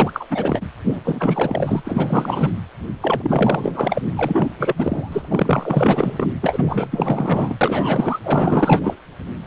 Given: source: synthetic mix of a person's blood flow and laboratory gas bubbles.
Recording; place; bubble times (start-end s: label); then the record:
Doppler ultrasound of blood flow; precordium
0.00-0.27 s: bubbles
0.30-0.63 s: bubbles
0.86-1.00 s: bubbles
1.04-2.51 s: bubbles
3.01-4.02 s: bubbles
4.16-4.48 s: bubbles
4.58-4.74 s: bubbles
4.77-6.32 s: bubbles
6.41-7.56 s: bubbles
7.61-8.19 s: bubbles
8.23-8.99 s: bubbles
From the record:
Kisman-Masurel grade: 444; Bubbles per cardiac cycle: continuous sound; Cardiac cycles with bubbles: 100%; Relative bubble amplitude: maximal (0.775 to 0.999); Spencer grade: 4 (maximum detectable bubble signal sounding continuously throughout systole and diastole of every cardiac period, and overriding the amplitude of the normal cardiac signals); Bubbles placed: anywhere in the cardiac cycle